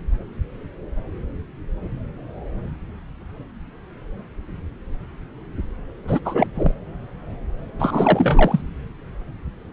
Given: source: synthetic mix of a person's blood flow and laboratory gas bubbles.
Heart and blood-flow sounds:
Doppler ultrasound of blood flow; subclavian vein
6.07-6.20 s: bubbles
6.25-6.47 s: bubbles
6.55-6.72 s: bubbles
7.79-8.61 s: bubbles
From the record:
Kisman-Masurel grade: 223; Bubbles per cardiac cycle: several, 3 to 8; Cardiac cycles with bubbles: 10 to 50%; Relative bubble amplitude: loud (0.450 to 0.775); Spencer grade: 2 (many but less than half of the cardiac periods contain bubble signals, singularly or in groups); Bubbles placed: anywhere in the cardiac cycle

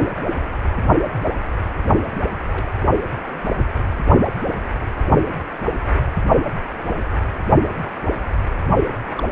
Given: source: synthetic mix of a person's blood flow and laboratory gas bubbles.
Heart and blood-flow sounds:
Doppler ultrasound of blood flow; precordium
2.52-2.70 s: bubbles
9.19-9.24 s: bubbles
From the record:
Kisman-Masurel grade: 121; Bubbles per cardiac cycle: 1 to 2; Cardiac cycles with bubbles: 10 to 50%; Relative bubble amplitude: barely perceptible (0.100 to 0.250); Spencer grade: 2 (many but less than half of the cardiac periods contain bubble signals, singularly or in groups); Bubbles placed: only in the low amplitude regions of the cardiac cycle

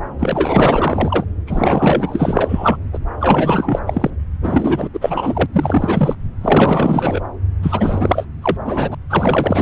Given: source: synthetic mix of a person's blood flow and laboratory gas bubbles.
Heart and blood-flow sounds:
Doppler ultrasound of blood flow; subclavian vein
0.19-1.25 s: bubbles
1.46-2.77 s: bubbles
2.93-2.99 s: bubbles
3.20-3.79 s: bubbles
3.86-4.11 s: bubbles
4.43-4.88 s: bubbles
4.94-5.46 s: bubbles
5.53-6.15 s: bubbles
6.41-7.21 s: bubbles
7.62-8.25 s: bubbles
8.42-8.56 s: bubbles
8.64-8.95 s: bubbles
9.09-9.62 s: bubbles
From the record:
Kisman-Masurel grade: 444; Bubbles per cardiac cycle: continuous sound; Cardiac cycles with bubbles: 100%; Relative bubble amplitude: maximal (0.775 to 0.999); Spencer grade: 4 (maximum detectable bubble signal sounding continuously throughout systole and diastole of every cardiac period, and overriding the amplitude of the normal cardiac signals); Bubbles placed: anywhere in the cardiac cycle

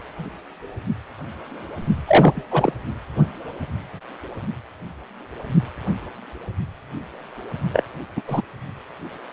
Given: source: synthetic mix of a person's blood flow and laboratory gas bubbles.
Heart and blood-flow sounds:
Doppler ultrasound of blood flow; precordium
2.08-2.44 s: bubbles
2.51-2.73 s: bubbles
7.73-7.83 s: bubbles
8.17-8.21 s: bubbles
8.28-8.42 s: bubbles
From the record:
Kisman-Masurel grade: 223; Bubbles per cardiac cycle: several, 3 to 8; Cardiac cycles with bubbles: 10 to 50%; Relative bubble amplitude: loud (0.450 to 0.775); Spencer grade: 2 (many but less than half of the cardiac periods contain bubble signals, singularly or in groups); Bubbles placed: anywhere in the cardiac cycle

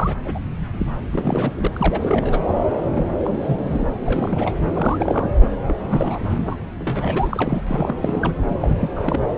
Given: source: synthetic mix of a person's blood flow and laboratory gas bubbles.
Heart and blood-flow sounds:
Doppler ultrasound of blood flow; subclavian vein
0.00-0.16 s: bubbles
0.25-0.39 s: bubbles
0.79-0.86 s: bubbles
1.11-1.68 s: bubbles
1.72-2.42 s: bubbles
2.85-3.05 s: bubbles
3.08-3.14 s: bubbles
3.19-3.89 s: bubbles
3.94-3.96 s: bubbles
4.03-4.55 s: bubbles
4.73-5.35 s: bubbles
5.40-5.48 s: bubbles
5.67-5.75 s: bubbles
5.85-6.57 s: bubbles
6.79-7.62 s: bubbles
7.67-7.95 s: bubbles
8.00-8.31 s: bubbles
8.48-8.57 s: bubbles
8.60-8.89 s: bubbles
8.96-9.20 s: bubbles
From the record:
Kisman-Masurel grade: 342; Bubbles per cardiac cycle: rolling drumbeat, 9 or more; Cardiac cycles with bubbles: 100%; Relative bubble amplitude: moderate (0.250 to 0.450); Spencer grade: 3 (all of the cardiac periods contain showers or single bubble signals, but not dominating or overriding the cardiac motion signals); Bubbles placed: anywhere in the cardiac cycle

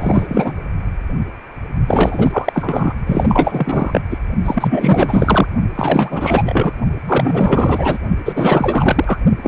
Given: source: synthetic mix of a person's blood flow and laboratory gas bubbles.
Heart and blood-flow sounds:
Doppler ultrasound of blood flow; precordium
0.00-0.52 s: bubbles
1.88-2.94 s: bubbles
3.06-4.01 s: bubbles
4.10-4.18 s: bubbles
4.45-5.47 s: bubbles
5.75-6.73 s: bubbles
7.04-7.98 s: bubbles
8.25-9.18 s: bubbles
9.43-9.47 s: bubbles
From the record:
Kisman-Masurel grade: 444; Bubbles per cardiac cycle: continuous sound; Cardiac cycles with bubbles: 100%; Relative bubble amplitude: maximal (0.775 to 0.999); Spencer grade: 4 (maximum detectable bubble signal sounding continuously throughout systole and diastole of every cardiac period, and overriding the amplitude of the normal cardiac signals); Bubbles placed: only in the low amplitude regions of the cardiac cycle

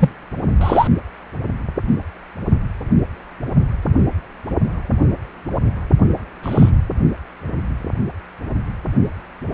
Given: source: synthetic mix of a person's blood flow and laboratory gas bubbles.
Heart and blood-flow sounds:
Doppler ultrasound of blood flow; precordium
0.00-0.09 s: bubbles
0.60-0.88 s: bubbles
6.42-6.71 s: bubbles
From the record:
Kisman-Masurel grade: 123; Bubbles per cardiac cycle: 1 to 2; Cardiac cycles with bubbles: 10 to 50%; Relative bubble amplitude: loud (0.450 to 0.775); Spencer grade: 2 (many but less than half of the cardiac periods contain bubble signals, singularly or in groups); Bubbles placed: only in the low amplitude regions of the cardiac cycle

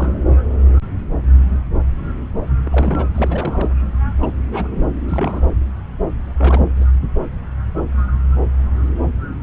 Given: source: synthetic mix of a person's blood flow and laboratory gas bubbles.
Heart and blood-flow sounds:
Doppler ultrasound of blood flow; subclavian vein
0.00-0.12 s: bubbles
2.64-3.05 s: bubbles
3.15-3.69 s: bubbles
4.19-4.33 s: bubbles
4.51-4.67 s: bubbles
5.08-5.55 s: bubbles
6.38-6.86 s: bubbles
From the record:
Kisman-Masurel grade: 221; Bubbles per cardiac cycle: several, 3 to 8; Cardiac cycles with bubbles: 10 to 50%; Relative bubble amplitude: barely perceptible (0.100 to 0.250); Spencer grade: 2 (many but less than half of the cardiac periods contain bubble signals, singularly or in groups); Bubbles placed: anywhere in the cardiac cycle

